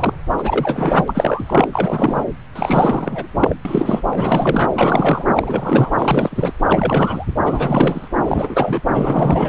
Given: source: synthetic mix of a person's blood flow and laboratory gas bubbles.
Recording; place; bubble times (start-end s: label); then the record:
Doppler ultrasound of blood flow; subclavian vein
0.00-0.14 s: bubbles
0.38-1.04 s: bubbles
1.07-1.70 s: bubbles
1.72-2.24 s: bubbles
2.55-3.27 s: bubbles
3.37-3.55 s: bubbles
3.65-4.02 s: bubbles
4.11-4.70 s: bubbles
4.73-5.24 s: bubbles
5.33-5.90 s: bubbles
5.98-6.52 s: bubbles
6.66-7.25 s: bubbles
7.45-8.08 s: bubbles
8.17-8.80 s: bubbles
8.93-9.49 s: bubbles
From the record:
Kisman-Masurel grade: 343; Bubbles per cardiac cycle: rolling drumbeat, 9 or more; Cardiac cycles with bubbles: 100%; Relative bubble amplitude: loud (0.450 to 0.775); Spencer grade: 3 (all of the cardiac periods contain showers or single bubble signals, but not dominating or overriding the cardiac motion signals); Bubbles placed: anywhere in the cardiac cycle